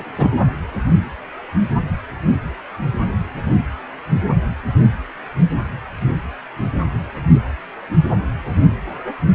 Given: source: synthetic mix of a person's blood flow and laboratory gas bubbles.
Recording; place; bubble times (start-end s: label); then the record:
Doppler ultrasound of blood flow; precordium
0.17-0.31 s: bubbles
From the record:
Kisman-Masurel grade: 213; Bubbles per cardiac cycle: several, 3 to 8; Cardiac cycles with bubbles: 1 to 10%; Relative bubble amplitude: loud (0.450 to 0.775); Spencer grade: 1 (occasional bubble signal discernible with the cardiac motion signal, with majority of cardiac periods free of bubbles); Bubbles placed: anywhere in the cardiac cycle